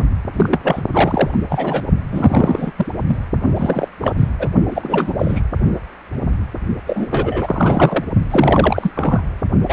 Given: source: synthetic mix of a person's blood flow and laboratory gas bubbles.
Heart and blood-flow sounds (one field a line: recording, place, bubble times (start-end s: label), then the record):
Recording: Doppler ultrasound of blood flow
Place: precordium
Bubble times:
0.33-0.81 s: bubbles
0.93-1.38 s: bubbles
1.50-1.84 s: bubbles
2.11-2.72 s: bubbles
2.77-2.86 s: bubbles
3.06-3.17 s: bubbles
3.56-3.88 s: bubbles
3.99-4.29 s: bubbles
4.39-4.48 s: bubbles
4.71-5.14 s: bubbles
5.19-5.41 s: bubbles
6.87-8.05 s: bubbles
8.30-8.91 s: bubbles
8.95-9.22 s: bubbles
9.68-9.73 s: bubbles
From the record:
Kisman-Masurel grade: 333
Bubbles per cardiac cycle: rolling drumbeat, 9 or more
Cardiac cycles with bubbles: 50 to 99%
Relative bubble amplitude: loud (0.450 to 0.775)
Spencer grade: 3 (all of the cardiac periods contain showers or single bubble signals, but not dominating or overriding the cardiac motion signals)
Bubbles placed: only in the low amplitude regions of the cardiac cycle